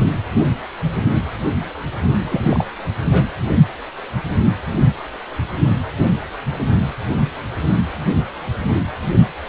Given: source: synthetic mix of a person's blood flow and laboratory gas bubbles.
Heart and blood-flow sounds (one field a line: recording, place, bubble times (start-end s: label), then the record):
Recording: Doppler ultrasound of blood flow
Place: precordium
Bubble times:
2.29-2.65 s: bubbles
3.12-3.23 s: bubbles
From the record:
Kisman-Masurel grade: 212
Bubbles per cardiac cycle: several, 3 to 8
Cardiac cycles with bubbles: 1 to 10%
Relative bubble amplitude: moderate (0.250 to 0.450)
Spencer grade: 1 (occasional bubble signal discernible with the cardiac motion signal, with majority of cardiac periods free of bubbles)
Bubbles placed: anywhere in the cardiac cycle